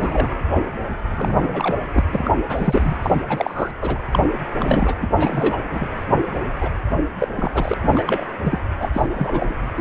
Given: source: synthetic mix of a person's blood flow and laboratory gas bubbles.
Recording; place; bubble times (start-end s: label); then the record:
Doppler ultrasound of blood flow; precordium
0.00-0.30 s: bubbles
1.11-1.75 s: bubbles
1.93-2.04 s: bubbles
2.10-2.43 s: bubbles
2.50-2.97 s: bubbles
3.02-3.22 s: bubbles
3.29-3.71 s: bubbles
3.81-3.98 s: bubbles
4.12-4.19 s: bubbles
4.59-4.95 s: bubbles
5.00-5.07 s: bubbles
5.15-5.59 s: bubbles
5.71-5.88 s: bubbles
6.61-6.69 s: bubbles
7.19-7.28 s: bubbles
7.37-7.52 s: bubbles
7.54-7.74 s: bubbles
7.81-8.25 s: bubbles
8.44-8.59 s: bubbles
8.79-8.89 s: bubbles
8.93-9.07 s: bubbles
9.15-9.54 s: bubbles
9.77-9.81 s: bubbles
From the record:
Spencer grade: 3 (all of the cardiac periods contain showers or single bubble signals, but not dominating or overriding the cardiac motion signals); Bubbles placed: anywhere in the cardiac cycle